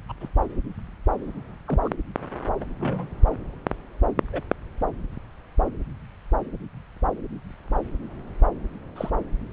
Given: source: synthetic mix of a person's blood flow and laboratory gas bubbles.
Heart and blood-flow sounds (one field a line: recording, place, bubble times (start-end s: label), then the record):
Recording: Doppler ultrasound of blood flow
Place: subclavian vein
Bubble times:
0.09-0.12 s: bubbles
0.20-0.28 s: bubbles
1.68-1.79 s: bubbles
1.84-1.89 s: bubbles
2.60-2.66 s: bubbles
2.79-3.08 s: bubbles
4.33-4.41 s: bubbles
8.96-9.10 s: bubbles
From the record:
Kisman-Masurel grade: 121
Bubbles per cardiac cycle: 1 to 2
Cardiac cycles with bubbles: 10 to 50%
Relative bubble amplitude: barely perceptible (0.100 to 0.250)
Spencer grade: 2 (many but less than half of the cardiac periods contain bubble signals, singularly or in groups)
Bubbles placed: anywhere in the cardiac cycle